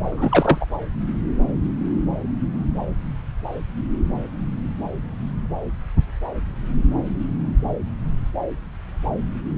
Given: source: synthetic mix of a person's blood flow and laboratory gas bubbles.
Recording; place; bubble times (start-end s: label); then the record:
Doppler ultrasound of blood flow; subclavian vein
0.03-0.66 s: bubbles
From the record:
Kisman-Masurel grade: 213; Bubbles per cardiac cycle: several, 3 to 8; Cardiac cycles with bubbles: 1 to 10%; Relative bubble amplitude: loud (0.450 to 0.775); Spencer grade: 1 (occasional bubble signal discernible with the cardiac motion signal, with majority of cardiac periods free of bubbles); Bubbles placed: anywhere in the cardiac cycle